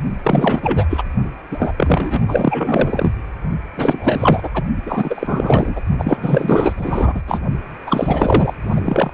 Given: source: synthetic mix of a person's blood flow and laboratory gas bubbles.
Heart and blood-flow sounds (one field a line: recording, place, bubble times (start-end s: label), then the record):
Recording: Doppler ultrasound of blood flow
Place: precordium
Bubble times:
0.23-0.87 s: bubbles
0.89-1.02 s: bubbles
1.50-1.72 s: bubbles
1.77-2.21 s: bubbles
2.28-3.12 s: bubbles
3.77-4.50 s: bubbles
4.54-4.63 s: bubbles
4.85-5.81 s: bubbles
5.98-6.73 s: bubbles
6.76-7.22 s: bubbles
7.26-7.40 s: bubbles
7.86-8.53 s: bubbles
8.71-9.14 s: bubbles
From the record:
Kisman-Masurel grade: 444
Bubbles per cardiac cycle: continuous sound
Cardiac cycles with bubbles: 100%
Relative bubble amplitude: maximal (0.775 to 0.999)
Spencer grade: 4 (maximum detectable bubble signal sounding continuously throughout systole and diastole of every cardiac period, and overriding the amplitude of the normal cardiac signals)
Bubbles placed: only in the low amplitude regions of the cardiac cycle